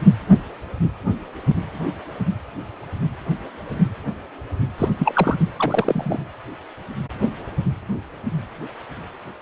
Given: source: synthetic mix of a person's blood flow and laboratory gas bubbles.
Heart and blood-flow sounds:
Doppler ultrasound of blood flow; precordium
4.78-4.88 s: bubbles
4.99-5.36 s: bubbles
5.58-6.19 s: bubbles
From the record:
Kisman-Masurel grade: 222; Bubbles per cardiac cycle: several, 3 to 8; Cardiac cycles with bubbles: 10 to 50%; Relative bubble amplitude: moderate (0.250 to 0.450); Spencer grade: 2 (many but less than half of the cardiac periods contain bubble signals, singularly or in groups); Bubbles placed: anywhere in the cardiac cycle

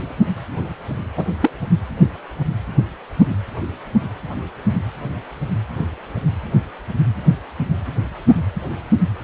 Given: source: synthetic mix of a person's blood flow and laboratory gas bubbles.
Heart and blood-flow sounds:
Doppler ultrasound of blood flow; precordium
1.17-1.25 s: bubbles
1.42-1.52 s: bubbles
From the record:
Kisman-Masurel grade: 113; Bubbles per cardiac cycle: 1 to 2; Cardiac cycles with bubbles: 1 to 10%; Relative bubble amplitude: loud (0.450 to 0.775); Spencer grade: 1 (occasional bubble signal discernible with the cardiac motion signal, with majority of cardiac periods free of bubbles); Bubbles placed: anywhere in the cardiac cycle

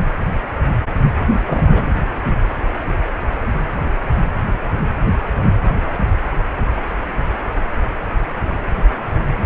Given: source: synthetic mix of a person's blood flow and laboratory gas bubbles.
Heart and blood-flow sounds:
Doppler ultrasound of blood flow; precordium
1.27-1.40 s: bubbles
1.45-1.92 s: bubbles
From the record:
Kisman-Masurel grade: 222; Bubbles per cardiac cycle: several, 3 to 8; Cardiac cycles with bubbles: 10 to 50%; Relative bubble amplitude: moderate (0.250 to 0.450); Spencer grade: 2 (many but less than half of the cardiac periods contain bubble signals, singularly or in groups); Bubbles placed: anywhere in the cardiac cycle

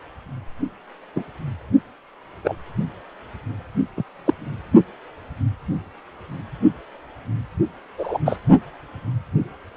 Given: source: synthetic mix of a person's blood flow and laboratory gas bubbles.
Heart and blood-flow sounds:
Doppler ultrasound of blood flow; precordium
1.16-1.24 s: bubbles
2.44-2.56 s: bubbles
3.96-4.03 s: bubbles
4.25-4.33 s: bubbles
7.98-8.18 s: bubbles
8.25-8.38 s: bubbles
From the record:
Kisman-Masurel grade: 123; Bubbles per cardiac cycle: 1 to 2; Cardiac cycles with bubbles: 10 to 50%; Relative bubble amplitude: loud (0.450 to 0.775); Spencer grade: 2 (many but less than half of the cardiac periods contain bubble signals, singularly or in groups); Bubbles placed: only in the low amplitude regions of the cardiac cycle

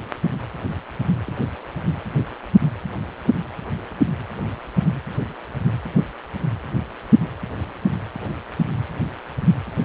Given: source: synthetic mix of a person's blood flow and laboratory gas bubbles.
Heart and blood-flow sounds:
Doppler ultrasound of blood flow; precordium
1.26-1.43 s: bubbles
From the record:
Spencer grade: 1 (occasional bubble signal discernible with the cardiac motion signal, with majority of cardiac periods free of bubbles); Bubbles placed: anywhere in the cardiac cycle

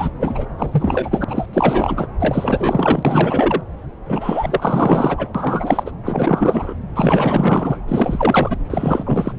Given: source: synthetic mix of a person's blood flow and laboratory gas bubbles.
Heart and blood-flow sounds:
Doppler ultrasound of blood flow; subclavian vein
0.00-0.10 s: bubbles
0.21-0.46 s: bubbles
0.57-1.25 s: bubbles
1.28-1.46 s: bubbles
1.53-2.07 s: bubbles
2.19-3.61 s: bubbles
4.08-5.32 s: bubbles
5.34-5.92 s: bubbles
6.05-6.74 s: bubbles
6.96-7.78 s: bubbles
7.88-8.57 s: bubbles
8.70-9.32 s: bubbles
From the record:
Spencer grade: 4 (maximum detectable bubble signal sounding continuously throughout systole and diastole of every cardiac period, and overriding the amplitude of the normal cardiac signals); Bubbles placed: anywhere in the cardiac cycle

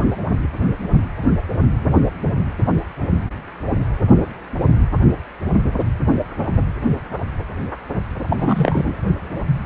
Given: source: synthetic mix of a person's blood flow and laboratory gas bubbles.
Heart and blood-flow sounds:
Doppler ultrasound of blood flow; precordium
8.28-8.95 s: bubbles
From the record:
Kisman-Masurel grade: 213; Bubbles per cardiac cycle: several, 3 to 8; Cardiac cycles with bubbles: 1 to 10%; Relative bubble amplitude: loud (0.450 to 0.775); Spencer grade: 1 (occasional bubble signal discernible with the cardiac motion signal, with majority of cardiac periods free of bubbles); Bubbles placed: only in the low amplitude regions of the cardiac cycle

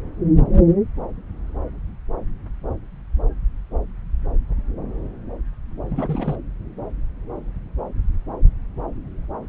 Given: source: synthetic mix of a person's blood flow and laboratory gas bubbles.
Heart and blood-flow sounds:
Doppler ultrasound of blood flow; subclavian vein
5.87-6.36 s: bubbles
From the record:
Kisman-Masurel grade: 211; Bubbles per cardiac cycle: several, 3 to 8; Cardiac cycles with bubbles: 1 to 10%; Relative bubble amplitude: barely perceptible (0.100 to 0.250); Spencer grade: 1 (occasional bubble signal discernible with the cardiac motion signal, with majority of cardiac periods free of bubbles); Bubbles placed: anywhere in the cardiac cycle

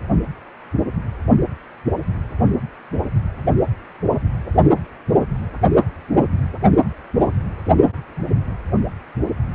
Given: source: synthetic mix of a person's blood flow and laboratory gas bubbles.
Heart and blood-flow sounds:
Doppler ultrasound of blood flow; precordium
no bubbles
From the record:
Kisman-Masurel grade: 000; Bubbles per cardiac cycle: 0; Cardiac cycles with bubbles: 0%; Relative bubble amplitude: no bubbles discernible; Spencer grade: 0 (complete lack of bubble signals)

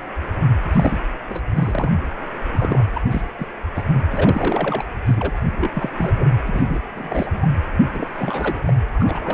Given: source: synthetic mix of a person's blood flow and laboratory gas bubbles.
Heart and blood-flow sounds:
Doppler ultrasound of blood flow; precordium
0.73-1.00 s: bubbles
1.29-1.41 s: bubbles
1.55-1.92 s: bubbles
2.51-2.85 s: bubbles
2.94-3.00 s: bubbles
3.10-3.22 s: bubbles
3.39-3.47 s: bubbles
3.75-3.83 s: bubbles
3.92-4.02 s: bubbles
4.12-4.84 s: bubbles
5.05-5.33 s: bubbles
5.58-5.71 s: bubbles
5.73-5.89 s: bubbles
5.92-6.42 s: bubbles
6.46-6.79 s: bubbles
6.95-7.46 s: bubbles
7.85-7.90 s: bubbles
7.94-8.09 s: bubbles
8.19-8.62 s: bubbles
8.66-8.73 s: bubbles
8.94-9.34 s: bubbles
From the record:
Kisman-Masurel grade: 332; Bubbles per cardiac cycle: rolling drumbeat, 9 or more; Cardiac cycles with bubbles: 50 to 99%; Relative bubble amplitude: moderate (0.250 to 0.450); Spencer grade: 3 (all of the cardiac periods contain showers or single bubble signals, but not dominating or overriding the cardiac motion signals); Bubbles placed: anywhere in the cardiac cycle

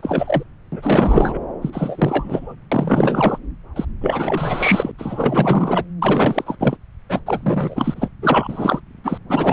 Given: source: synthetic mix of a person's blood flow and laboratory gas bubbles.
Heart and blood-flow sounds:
Doppler ultrasound of blood flow; subclavian vein
0.00-0.43 s: bubbles
0.72-1.39 s: bubbles
1.61-2.55 s: bubbles
2.71-3.38 s: bubbles
3.76-3.85 s: bubbles
4.00-4.92 s: bubbles
4.98-5.84 s: bubbles
6.01-6.56 s: bubbles
6.59-6.77 s: bubbles
7.09-7.19 s: bubbles
7.26-8.08 s: bubbles
8.21-8.80 s: bubbles
9.04-9.18 s: bubbles
9.29-9.53 s: bubbles
From the record:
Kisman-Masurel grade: 444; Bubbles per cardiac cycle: continuous sound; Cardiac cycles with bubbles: 100%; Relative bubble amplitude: maximal (0.775 to 0.999); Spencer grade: 4 (maximum detectable bubble signal sounding continuously throughout systole and diastole of every cardiac period, and overriding the amplitude of the normal cardiac signals); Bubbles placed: anywhere in the cardiac cycle

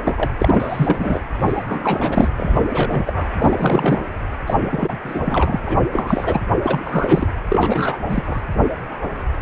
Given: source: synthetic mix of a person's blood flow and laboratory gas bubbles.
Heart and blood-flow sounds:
Doppler ultrasound of blood flow; precordium
0.03-0.30 s: bubbles
0.39-1.22 s: bubbles
1.40-1.64 s: bubbles
1.67-2.28 s: bubbles
2.36-2.61 s: bubbles
2.69-3.29 s: bubbles
3.34-4.01 s: bubbles
4.46-4.98 s: bubbles
5.04-5.60 s: bubbles
5.64-5.79 s: bubbles
5.92-6.41 s: bubbles
6.62-7.27 s: bubbles
7.48-7.99 s: bubbles
8.08-8.43 s: bubbles
From the record:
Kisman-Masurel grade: 332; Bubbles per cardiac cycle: rolling drumbeat, 9 or more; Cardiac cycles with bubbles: 50 to 99%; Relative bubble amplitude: moderate (0.250 to 0.450); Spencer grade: 3 (all of the cardiac periods contain showers or single bubble signals, but not dominating or overriding the cardiac motion signals); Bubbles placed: anywhere in the cardiac cycle

